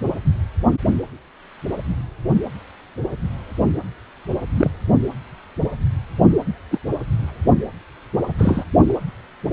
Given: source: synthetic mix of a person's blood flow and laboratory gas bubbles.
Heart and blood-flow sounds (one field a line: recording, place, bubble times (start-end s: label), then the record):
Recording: Doppler ultrasound of blood flow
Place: precordium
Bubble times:
4.56-4.71 s: bubbles
6.71-6.79 s: bubbles
8.38-8.64 s: bubbles
8.88-8.93 s: bubbles
From the record:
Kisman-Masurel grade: 123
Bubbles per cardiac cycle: 1 to 2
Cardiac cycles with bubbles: 10 to 50%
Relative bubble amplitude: loud (0.450 to 0.775)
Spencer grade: 2 (many but less than half of the cardiac periods contain bubble signals, singularly or in groups)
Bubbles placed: anywhere in the cardiac cycle